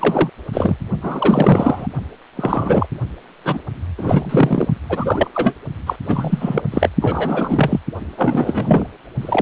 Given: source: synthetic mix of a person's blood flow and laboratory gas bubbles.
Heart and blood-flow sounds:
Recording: Doppler ultrasound of blood flow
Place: precordium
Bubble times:
0.00-0.29 s: bubbles
0.53-0.76 s: bubbles
1.02-1.87 s: bubbles
2.37-2.87 s: bubbles
3.43-3.59 s: bubbles
3.97-4.68 s: bubbles
4.89-5.28 s: bubbles
5.33-5.55 s: bubbles
5.86-5.96 s: bubbles
6.06-6.62 s: bubbles
6.71-6.89 s: bubbles
7.01-7.79 s: bubbles
8.17-8.87 s: bubbles
9.21-9.42 s: bubbles
From the record:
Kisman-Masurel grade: 343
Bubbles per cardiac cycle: rolling drumbeat, 9 or more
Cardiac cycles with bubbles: 100%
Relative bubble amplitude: loud (0.450 to 0.775)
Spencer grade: 3 (all of the cardiac periods contain showers or single bubble signals, but not dominating or overriding the cardiac motion signals)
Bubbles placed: only in the low amplitude regions of the cardiac cycle

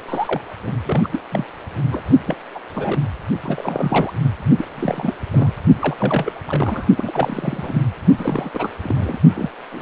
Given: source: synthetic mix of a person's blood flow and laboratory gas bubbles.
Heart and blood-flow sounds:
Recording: Doppler ultrasound of blood flow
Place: precordium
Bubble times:
0.08-0.41 s: bubbles
0.63-1.08 s: bubbles
1.11-1.20 s: bubbles
1.31-1.45 s: bubbles
1.92-2.02 s: bubbles
2.26-2.36 s: bubbles
2.54-2.60 s: bubbles
2.73-3.00 s: bubbles
3.43-4.12 s: bubbles
4.58-4.66 s: bubbles
4.75-5.14 s: bubbles
5.33-5.52 s: bubbles
5.80-6.32 s: bubbles
6.46-6.85 s: bubbles
6.96-7.82 s: bubbles
8.18-8.50 s: bubbles
8.54-8.70 s: bubbles
8.82-9.18 s: bubbles
9.34-9.49 s: bubbles
9.72-9.82 s: bubbles
From the record:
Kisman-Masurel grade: 342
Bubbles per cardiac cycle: rolling drumbeat, 9 or more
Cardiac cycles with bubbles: 100%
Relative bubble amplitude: moderate (0.250 to 0.450)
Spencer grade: 3 (all of the cardiac periods contain showers or single bubble signals, but not dominating or overriding the cardiac motion signals)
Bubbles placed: only in the low amplitude regions of the cardiac cycle

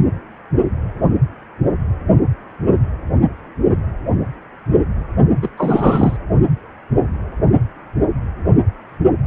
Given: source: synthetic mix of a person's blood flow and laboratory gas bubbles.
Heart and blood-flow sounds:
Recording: Doppler ultrasound of blood flow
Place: precordium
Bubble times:
5.42-5.50 s: bubbles
5.57-6.17 s: bubbles
From the record:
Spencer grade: 1 (occasional bubble signal discernible with the cardiac motion signal, with majority of cardiac periods free of bubbles)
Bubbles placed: only in the low amplitude regions of the cardiac cycle

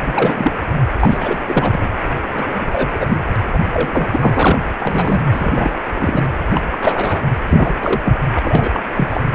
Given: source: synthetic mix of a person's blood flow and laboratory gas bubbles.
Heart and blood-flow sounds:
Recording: Doppler ultrasound of blood flow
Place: precordium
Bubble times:
0.00-0.52 s: bubbles
0.99-1.38 s: bubbles
1.46-1.89 s: bubbles
2.33-2.67 s: bubbles
2.72-3.20 s: bubbles
3.53-3.59 s: bubbles
3.73-4.08 s: bubbles
4.12-4.59 s: bubbles
4.79-5.20 s: bubbles
5.33-5.76 s: bubbles
5.95-6.24 s: bubbles
6.54-6.61 s: bubbles
6.71-6.78 s: bubbles
6.81-7.21 s: bubbles
7.49-7.74 s: bubbles
7.82-8.00 s: bubbles
8.04-8.17 s: bubbles
8.35-8.39 s: bubbles
8.42-8.82 s: bubbles
8.94-9.23 s: bubbles
From the record:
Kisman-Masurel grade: 243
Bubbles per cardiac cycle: several, 3 to 8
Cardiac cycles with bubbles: 100%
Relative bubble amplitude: loud (0.450 to 0.775)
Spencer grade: 3 (all of the cardiac periods contain showers or single bubble signals, but not dominating or overriding the cardiac motion signals)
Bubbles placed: anywhere in the cardiac cycle

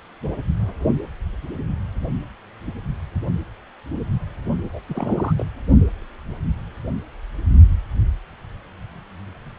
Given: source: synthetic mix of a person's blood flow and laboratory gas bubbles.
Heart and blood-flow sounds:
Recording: Doppler ultrasound of blood flow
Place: precordium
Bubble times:
4.73-4.80 s: bubbles
4.89-5.34 s: bubbles
5.37-5.46 s: bubbles
From the record:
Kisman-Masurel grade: 211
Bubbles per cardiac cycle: several, 3 to 8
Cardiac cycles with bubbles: 1 to 10%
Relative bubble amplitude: barely perceptible (0.100 to 0.250)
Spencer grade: 1 (occasional bubble signal discernible with the cardiac motion signal, with majority of cardiac periods free of bubbles)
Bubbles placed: only in the low amplitude regions of the cardiac cycle

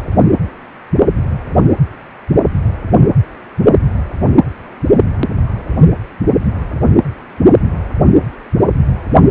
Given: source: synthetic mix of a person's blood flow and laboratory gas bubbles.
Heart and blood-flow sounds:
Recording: Doppler ultrasound of blood flow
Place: precordium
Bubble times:
no bubbles
From the record:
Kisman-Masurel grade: 000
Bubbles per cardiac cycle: 0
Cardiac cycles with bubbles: 0%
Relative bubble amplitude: no bubbles discernible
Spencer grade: 0 (complete lack of bubble signals)

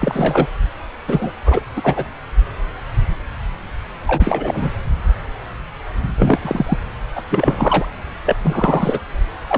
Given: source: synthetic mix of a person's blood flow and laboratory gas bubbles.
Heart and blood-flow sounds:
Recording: Doppler ultrasound of blood flow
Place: subclavian vein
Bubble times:
0.00-0.47 s: bubbles
1.08-1.31 s: bubbles
1.46-1.62 s: bubbles
1.75-2.08 s: bubbles
4.07-4.71 s: bubbles
6.18-6.78 s: bubbles
7.16-7.22 s: bubbles
7.30-7.85 s: bubbles
8.26-8.36 s: bubbles
8.42-9.00 s: bubbles
9.49-9.58 s: bubbles
From the record:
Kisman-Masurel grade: 333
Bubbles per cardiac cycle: rolling drumbeat, 9 or more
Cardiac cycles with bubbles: 50 to 99%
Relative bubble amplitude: loud (0.450 to 0.775)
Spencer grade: 3 (all of the cardiac periods contain showers or single bubble signals, but not dominating or overriding the cardiac motion signals)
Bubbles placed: anywhere in the cardiac cycle

